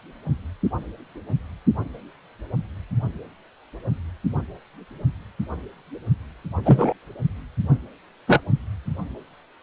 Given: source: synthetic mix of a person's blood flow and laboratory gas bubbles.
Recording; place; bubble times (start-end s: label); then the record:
Doppler ultrasound of blood flow; precordium
6.65-6.94 s: bubbles
8.27-8.41 s: bubbles
From the record:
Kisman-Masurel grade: 123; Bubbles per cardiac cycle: 1 to 2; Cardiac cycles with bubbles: 10 to 50%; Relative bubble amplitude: loud (0.450 to 0.775); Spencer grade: 2 (many but less than half of the cardiac periods contain bubble signals, singularly or in groups); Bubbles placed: anywhere in the cardiac cycle